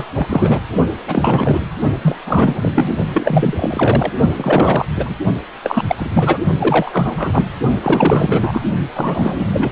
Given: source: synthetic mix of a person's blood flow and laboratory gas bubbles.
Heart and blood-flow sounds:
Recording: Doppler ultrasound of blood flow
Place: precordium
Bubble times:
0.00-0.05 s: bubbles
0.15-0.59 s: bubbles
1.07-1.60 s: bubbles
2.01-2.94 s: bubbles
3.12-4.12 s: bubbles
4.36-4.86 s: bubbles
4.96-5.17 s: bubbles
5.64-5.83 s: bubbles
5.88-6.09 s: bubbles
6.14-6.38 s: bubbles
6.58-7.45 s: bubbles
7.82-8.61 s: bubbles
8.95-9.72 s: bubbles
From the record:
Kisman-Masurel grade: 343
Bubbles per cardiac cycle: rolling drumbeat, 9 or more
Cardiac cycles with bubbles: 100%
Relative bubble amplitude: loud (0.450 to 0.775)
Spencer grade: 3 (all of the cardiac periods contain showers or single bubble signals, but not dominating or overriding the cardiac motion signals)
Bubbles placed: only in the low amplitude regions of the cardiac cycle

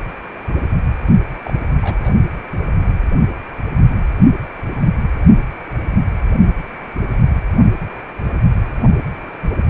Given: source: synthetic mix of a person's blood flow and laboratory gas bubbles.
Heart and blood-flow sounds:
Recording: Doppler ultrasound of blood flow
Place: precordium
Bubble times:
1.45-1.52 s: bubbles
1.64-1.67 s: bubbles
1.82-2.20 s: bubbles
From the record:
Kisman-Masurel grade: 221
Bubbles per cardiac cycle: several, 3 to 8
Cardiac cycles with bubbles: 10 to 50%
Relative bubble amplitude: barely perceptible (0.100 to 0.250)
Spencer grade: 2 (many but less than half of the cardiac periods contain bubble signals, singularly or in groups)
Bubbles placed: only in the low amplitude regions of the cardiac cycle

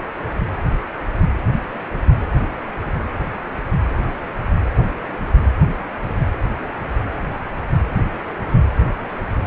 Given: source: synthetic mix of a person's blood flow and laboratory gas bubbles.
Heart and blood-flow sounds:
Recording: Doppler ultrasound of blood flow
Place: precordium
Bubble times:
no bubbles
From the record:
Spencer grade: 0 (complete lack of bubble signals)

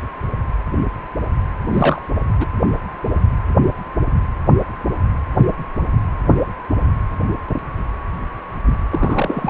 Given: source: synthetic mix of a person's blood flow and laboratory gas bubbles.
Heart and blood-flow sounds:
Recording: Doppler ultrasound of blood flow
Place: precordium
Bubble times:
1.72-2.00 s: bubbles
2.40-2.46 s: bubbles
8.90-9.50 s: bubbles
From the record:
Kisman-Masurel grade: 222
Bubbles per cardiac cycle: several, 3 to 8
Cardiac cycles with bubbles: 10 to 50%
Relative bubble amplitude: moderate (0.250 to 0.450)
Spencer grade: 2 (many but less than half of the cardiac periods contain bubble signals, singularly or in groups)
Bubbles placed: anywhere in the cardiac cycle

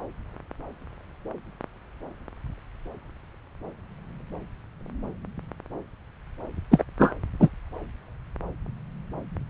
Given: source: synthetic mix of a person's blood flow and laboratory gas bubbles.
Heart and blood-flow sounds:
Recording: Doppler ultrasound of blood flow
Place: subclavian vein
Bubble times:
6.71-6.84 s: bubbles
6.99-7.14 s: bubbles
7.39-7.49 s: bubbles
From the record:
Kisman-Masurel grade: 213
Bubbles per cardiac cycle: several, 3 to 8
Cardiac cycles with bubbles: 1 to 10%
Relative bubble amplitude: loud (0.450 to 0.775)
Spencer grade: 1 (occasional bubble signal discernible with the cardiac motion signal, with majority of cardiac periods free of bubbles)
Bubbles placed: anywhere in the cardiac cycle

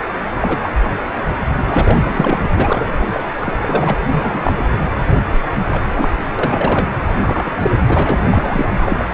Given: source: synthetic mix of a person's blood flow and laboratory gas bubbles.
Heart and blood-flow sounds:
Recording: Doppler ultrasound of blood flow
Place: precordium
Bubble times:
0.41-0.57 s: bubbles
0.61-0.70 s: bubbles
1.58-2.50 s: bubbles
2.56-3.02 s: bubbles
3.12-3.24 s: bubbles
3.40-3.53 s: bubbles
3.60-3.98 s: bubbles
4.11-4.53 s: bubbles
5.71-5.84 s: bubbles
5.96-6.10 s: bubbles
6.39-6.88 s: bubbles
7.12-7.79 s: bubbles
7.89-8.22 s: bubbles
8.30-8.65 s: bubbles
8.81-9.05 s: bubbles
From the record:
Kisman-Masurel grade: 232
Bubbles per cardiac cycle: several, 3 to 8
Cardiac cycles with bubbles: 50 to 99%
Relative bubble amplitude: moderate (0.250 to 0.450)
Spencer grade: 3 (all of the cardiac periods contain showers or single bubble signals, but not dominating or overriding the cardiac motion signals)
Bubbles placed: anywhere in the cardiac cycle

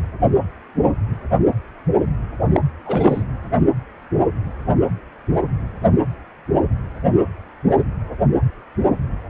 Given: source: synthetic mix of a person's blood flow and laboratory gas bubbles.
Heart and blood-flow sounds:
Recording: Doppler ultrasound of blood flow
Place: precordium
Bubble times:
2.52-2.60 s: bubbles
2.85-3.24 s: bubbles
From the record:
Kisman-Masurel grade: 223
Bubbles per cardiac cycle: several, 3 to 8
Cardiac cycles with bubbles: 10 to 50%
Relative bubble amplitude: loud (0.450 to 0.775)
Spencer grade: 2 (many but less than half of the cardiac periods contain bubble signals, singularly or in groups)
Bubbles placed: anywhere in the cardiac cycle

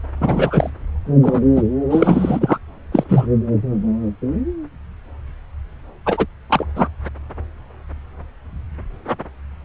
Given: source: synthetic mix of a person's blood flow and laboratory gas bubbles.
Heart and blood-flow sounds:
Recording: Doppler ultrasound of blood flow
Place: subclavian vein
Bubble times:
0.20-0.70 s: bubbles
1.22-1.41 s: bubbles
1.55-1.62 s: bubbles
1.89-2.58 s: bubbles
2.92-3.04 s: bubbles
3.08-3.26 s: bubbles
6.06-6.26 s: bubbles
6.50-6.65 s: bubbles
6.75-6.88 s: bubbles
From the record:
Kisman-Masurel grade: 223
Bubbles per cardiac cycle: several, 3 to 8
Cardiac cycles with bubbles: 10 to 50%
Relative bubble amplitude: loud (0.450 to 0.775)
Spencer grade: 2 (many but less than half of the cardiac periods contain bubble signals, singularly or in groups)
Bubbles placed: anywhere in the cardiac cycle

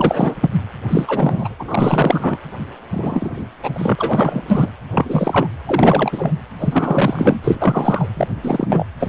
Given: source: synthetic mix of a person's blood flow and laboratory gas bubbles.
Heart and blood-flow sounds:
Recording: Doppler ultrasound of blood flow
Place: precordium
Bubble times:
0.00-0.49 s: bubbles
0.89-1.55 s: bubbles
1.59-2.38 s: bubbles
2.92-3.46 s: bubbles
3.63-3.70 s: bubbles
3.73-4.71 s: bubbles
4.92-5.47 s: bubbles
5.67-6.32 s: bubbles
6.59-7.41 s: bubbles
7.44-8.08 s: bubbles
8.16-8.27 s: bubbles
8.42-8.67 s: bubbles
8.69-8.86 s: bubbles
8.99-9.09 s: bubbles
From the record:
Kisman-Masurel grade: 343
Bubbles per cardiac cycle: rolling drumbeat, 9 or more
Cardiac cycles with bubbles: 100%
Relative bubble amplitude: loud (0.450 to 0.775)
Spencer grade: 3 (all of the cardiac periods contain showers or single bubble signals, but not dominating or overriding the cardiac motion signals)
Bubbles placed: anywhere in the cardiac cycle

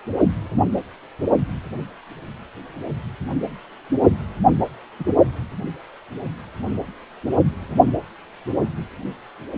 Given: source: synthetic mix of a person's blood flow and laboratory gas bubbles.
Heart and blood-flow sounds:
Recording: Doppler ultrasound of blood flow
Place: precordium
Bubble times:
4.99-5.05 s: bubbles
From the record:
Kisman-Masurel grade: 112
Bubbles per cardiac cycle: 1 to 2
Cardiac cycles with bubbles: 1 to 10%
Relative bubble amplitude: moderate (0.250 to 0.450)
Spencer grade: 1 (occasional bubble signal discernible with the cardiac motion signal, with majority of cardiac periods free of bubbles)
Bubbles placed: only in the low amplitude regions of the cardiac cycle

